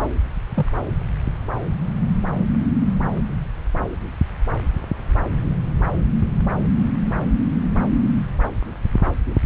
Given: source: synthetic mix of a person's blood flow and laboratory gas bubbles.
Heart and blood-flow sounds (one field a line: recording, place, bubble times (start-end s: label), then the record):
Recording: Doppler ultrasound of blood flow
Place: subclavian vein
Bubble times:
0.54-0.72 s: bubbles
From the record:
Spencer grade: 1 (occasional bubble signal discernible with the cardiac motion signal, with majority of cardiac periods free of bubbles)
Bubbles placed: anywhere in the cardiac cycle